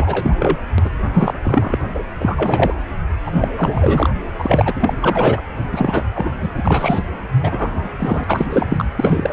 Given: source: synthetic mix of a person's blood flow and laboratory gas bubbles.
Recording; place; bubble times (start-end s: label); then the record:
Doppler ultrasound of blood flow; precordium
0.00-0.35 s: bubbles
0.39-0.58 s: bubbles
0.78-0.90 s: bubbles
1.10-1.40 s: bubbles
1.42-1.79 s: bubbles
1.95-2.04 s: bubbles
2.20-2.74 s: bubbles
3.26-3.31 s: bubbles
3.35-4.09 s: bubbles
4.38-4.74 s: bubbles
4.76-4.93 s: bubbles
5.01-5.42 s: bubbles
5.72-6.02 s: bubbles
6.14-6.30 s: bubbles
6.42-6.49 s: bubbles
6.55-7.03 s: bubbles
7.42-7.90 s: bubbles
7.99-8.24 s: bubbles
8.27-8.85 s: bubbles
8.96-9.33 s: bubbles
From the record:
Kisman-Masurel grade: 343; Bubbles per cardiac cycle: rolling drumbeat, 9 or more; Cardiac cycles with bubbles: 100%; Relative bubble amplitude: loud (0.450 to 0.775); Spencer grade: 3 (all of the cardiac periods contain showers or single bubble signals, but not dominating or overriding the cardiac motion signals); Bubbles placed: anywhere in the cardiac cycle